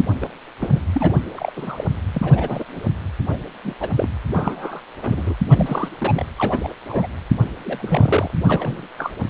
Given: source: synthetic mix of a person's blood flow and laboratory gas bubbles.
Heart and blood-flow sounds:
Doppler ultrasound of blood flow; precordium
0.21-0.29 s: bubbles
0.60-0.80 s: bubbles
0.93-1.12 s: bubbles
1.35-1.51 s: bubbles
1.56-1.84 s: bubbles
2.13-2.65 s: bubbles
2.75-2.81 s: bubbles
3.29-3.38 s: bubbles
3.63-3.75 s: bubbles
3.80-3.88 s: bubbles
3.96-4.09 s: bubbles
4.33-4.80 s: bubbles
5.01-5.34 s: bubbles
5.50-5.88 s: bubbles
6.00-6.25 s: bubbles
6.38-6.72 s: bubbles
6.88-7.07 s: bubbles
7.64-8.31 s: bubbles
8.48-8.88 s: bubbles
8.98-9.12 s: bubbles
From the record:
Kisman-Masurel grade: 242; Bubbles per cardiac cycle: several, 3 to 8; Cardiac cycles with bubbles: 100%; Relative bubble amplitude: moderate (0.250 to 0.450); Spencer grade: 3 (all of the cardiac periods contain showers or single bubble signals, but not dominating or overriding the cardiac motion signals); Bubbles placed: anywhere in the cardiac cycle

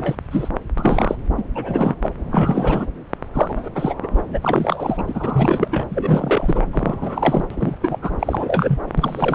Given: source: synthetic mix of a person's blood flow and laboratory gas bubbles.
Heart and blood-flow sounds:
Doppler ultrasound of blood flow; subclavian vein
0.00-0.15 s: bubbles
0.31-0.49 s: bubbles
0.78-1.17 s: bubbles
1.35-1.48 s: bubbles
1.55-1.95 s: bubbles
2.02-2.10 s: bubbles
2.23-2.87 s: bubbles
3.33-3.69 s: bubbles
3.75-3.95 s: bubbles
4.03-4.07 s: bubbles
4.10-4.22 s: bubbles
4.30-4.39 s: bubbles
4.41-5.02 s: bubbles
5.06-5.68 s: bubbles
5.71-5.87 s: bubbles
5.91-6.65 s: bubbles
6.72-7.45 s: bubbles
7.50-7.75 s: bubbles
7.82-7.98 s: bubbles
8.01-8.11 s: bubbles
8.19-8.79 s: bubbles
8.97-9.35 s: bubbles
From the record:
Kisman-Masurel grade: 342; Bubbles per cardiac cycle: rolling drumbeat, 9 or more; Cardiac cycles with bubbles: 100%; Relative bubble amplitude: moderate (0.250 to 0.450); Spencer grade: 3 (all of the cardiac periods contain showers or single bubble signals, but not dominating or overriding the cardiac motion signals); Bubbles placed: anywhere in the cardiac cycle

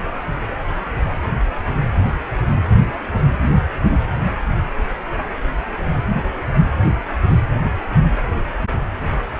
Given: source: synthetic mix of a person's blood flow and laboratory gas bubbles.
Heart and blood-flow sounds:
Doppler ultrasound of blood flow; precordium
no bubbles
From the record:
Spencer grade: 0 (complete lack of bubble signals)

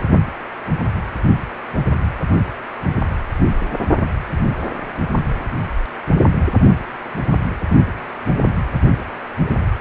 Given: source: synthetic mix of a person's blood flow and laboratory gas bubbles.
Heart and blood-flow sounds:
Doppler ultrasound of blood flow; precordium
no bubbles
From the record:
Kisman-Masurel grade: 000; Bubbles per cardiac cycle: 0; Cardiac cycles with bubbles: 0%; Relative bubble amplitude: no bubbles discernible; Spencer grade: 0 (complete lack of bubble signals)

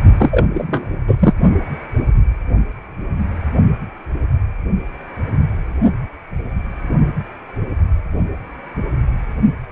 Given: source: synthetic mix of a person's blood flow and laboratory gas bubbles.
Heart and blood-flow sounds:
Doppler ultrasound of blood flow; precordium
0.18-0.46 s: bubbles
0.53-0.90 s: bubbles
1.07-1.34 s: bubbles
From the record:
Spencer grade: 1 (occasional bubble signal discernible with the cardiac motion signal, with majority of cardiac periods free of bubbles); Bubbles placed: only in the low amplitude regions of the cardiac cycle

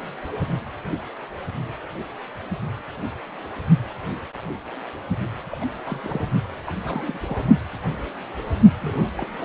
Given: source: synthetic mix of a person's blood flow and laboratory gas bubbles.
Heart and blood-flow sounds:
Doppler ultrasound of blood flow; precordium
5.50-5.58 s: bubbles
5.60-5.65 s: bubbles
5.85-6.32 s: bubbles
6.64-6.72 s: bubbles
6.82-7.41 s: bubbles
8.82-9.02 s: bubbles
9.17-9.28 s: bubbles
9.41-9.45 s: bubbles
From the record:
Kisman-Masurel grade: 221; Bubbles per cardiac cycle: several, 3 to 8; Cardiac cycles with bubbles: 10 to 50%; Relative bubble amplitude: barely perceptible (0.100 to 0.250); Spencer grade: 2 (many but less than half of the cardiac periods contain bubble signals, singularly or in groups); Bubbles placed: only in the low amplitude regions of the cardiac cycle

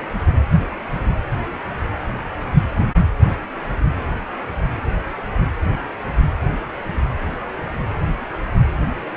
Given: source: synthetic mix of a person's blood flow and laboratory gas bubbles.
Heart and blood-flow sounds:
Doppler ultrasound of blood flow; precordium
no bubbles
From the record:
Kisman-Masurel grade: 000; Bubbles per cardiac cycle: 0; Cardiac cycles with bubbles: 0%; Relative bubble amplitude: no bubbles discernible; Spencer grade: 0 (complete lack of bubble signals)

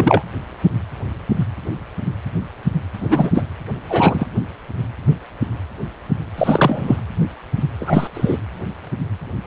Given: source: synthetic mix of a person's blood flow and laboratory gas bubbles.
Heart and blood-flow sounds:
Doppler ultrasound of blood flow; precordium
0.00-0.23 s: bubbles
2.94-3.31 s: bubbles
3.33-3.44 s: bubbles
3.88-4.27 s: bubbles
6.38-6.96 s: bubbles
7.80-8.07 s: bubbles
8.14-8.38 s: bubbles
From the record:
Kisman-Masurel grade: 223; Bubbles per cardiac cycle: several, 3 to 8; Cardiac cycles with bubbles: 10 to 50%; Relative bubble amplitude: loud (0.450 to 0.775); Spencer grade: 2 (many but less than half of the cardiac periods contain bubble signals, singularly or in groups); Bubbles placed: anywhere in the cardiac cycle

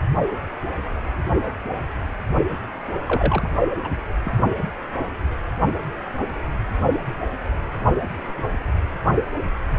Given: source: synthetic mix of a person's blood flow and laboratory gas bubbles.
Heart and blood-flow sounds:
Doppler ultrasound of blood flow; precordium
3.05-3.50 s: bubbles
3.82-3.89 s: bubbles
4.24-4.32 s: bubbles
From the record:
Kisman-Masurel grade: 212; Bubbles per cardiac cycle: several, 3 to 8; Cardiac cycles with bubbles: 1 to 10%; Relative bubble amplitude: moderate (0.250 to 0.450); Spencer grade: 1 (occasional bubble signal discernible with the cardiac motion signal, with majority of cardiac periods free of bubbles); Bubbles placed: only in the low amplitude regions of the cardiac cycle

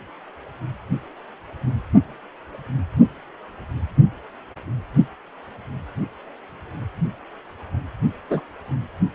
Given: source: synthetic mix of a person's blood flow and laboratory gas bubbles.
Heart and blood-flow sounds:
Doppler ultrasound of blood flow; precordium
8.30-8.40 s: bubbles
From the record:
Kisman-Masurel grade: 113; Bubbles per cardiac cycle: 1 to 2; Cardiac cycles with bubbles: 1 to 10%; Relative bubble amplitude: loud (0.450 to 0.775); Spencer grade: 1 (occasional bubble signal discernible with the cardiac motion signal, with majority of cardiac periods free of bubbles); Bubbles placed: anywhere in the cardiac cycle

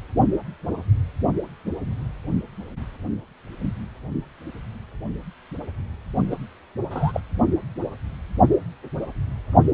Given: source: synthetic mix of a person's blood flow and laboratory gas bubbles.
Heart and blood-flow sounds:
Doppler ultrasound of blood flow; precordium
6.31-6.36 s: bubbles
6.91-7.21 s: bubbles
From the record:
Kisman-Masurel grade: 211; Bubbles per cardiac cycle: several, 3 to 8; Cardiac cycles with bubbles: 1 to 10%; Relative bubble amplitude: barely perceptible (0.100 to 0.250); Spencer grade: 1 (occasional bubble signal discernible with the cardiac motion signal, with majority of cardiac periods free of bubbles); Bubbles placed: only in the low amplitude regions of the cardiac cycle

